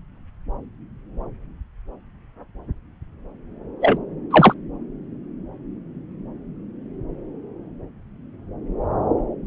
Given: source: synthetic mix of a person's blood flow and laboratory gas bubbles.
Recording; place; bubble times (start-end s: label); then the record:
Doppler ultrasound of blood flow; subclavian vein
3.81-3.97 s: bubbles
4.31-4.54 s: bubbles
From the record:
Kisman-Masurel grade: 123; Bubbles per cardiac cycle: 1 to 2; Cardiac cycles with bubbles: 10 to 50%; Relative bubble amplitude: loud (0.450 to 0.775); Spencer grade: 2 (many but less than half of the cardiac periods contain bubble signals, singularly or in groups); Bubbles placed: anywhere in the cardiac cycle